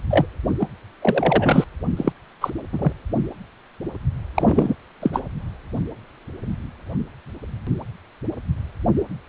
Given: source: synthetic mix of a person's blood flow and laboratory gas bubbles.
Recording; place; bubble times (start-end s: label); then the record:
Doppler ultrasound of blood flow; precordium
0.10-0.26 s: bubbles
0.59-0.67 s: bubbles
1.02-1.65 s: bubbles
1.96-2.12 s: bubbles
2.41-2.50 s: bubbles
2.73-2.92 s: bubbles
4.35-4.75 s: bubbles
5.02-5.11 s: bubbles
5.13-5.22 s: bubbles
From the record:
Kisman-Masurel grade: 222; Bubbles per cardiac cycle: several, 3 to 8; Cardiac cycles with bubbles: 10 to 50%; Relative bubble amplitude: moderate (0.250 to 0.450); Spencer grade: 2 (many but less than half of the cardiac periods contain bubble signals, singularly or in groups); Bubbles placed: anywhere in the cardiac cycle